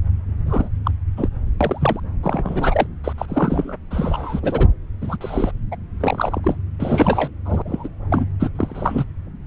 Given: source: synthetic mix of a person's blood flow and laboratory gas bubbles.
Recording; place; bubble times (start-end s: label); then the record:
Doppler ultrasound of blood flow; subclavian vein
0.46-0.69 s: bubbles
0.84-0.91 s: bubbles
1.17-1.28 s: bubbles
1.60-2.00 s: bubbles
2.23-2.87 s: bubbles
3.04-3.13 s: bubbles
3.18-3.25 s: bubbles
3.28-3.77 s: bubbles
3.91-4.40 s: bubbles
4.42-4.67 s: bubbles
5.01-5.17 s: bubbles
5.21-5.51 s: bubbles
5.71-5.76 s: bubbles
6.00-6.41 s: bubbles
6.43-6.56 s: bubbles
6.79-7.31 s: bubbles
7.45-7.62 s: bubbles
7.65-7.89 s: bubbles
8.10-8.25 s: bubbles
8.39-8.49 s: bubbles
8.55-9.04 s: bubbles
From the record:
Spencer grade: 3 (all of the cardiac periods contain showers or single bubble signals, but not dominating or overriding the cardiac motion signals); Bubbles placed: anywhere in the cardiac cycle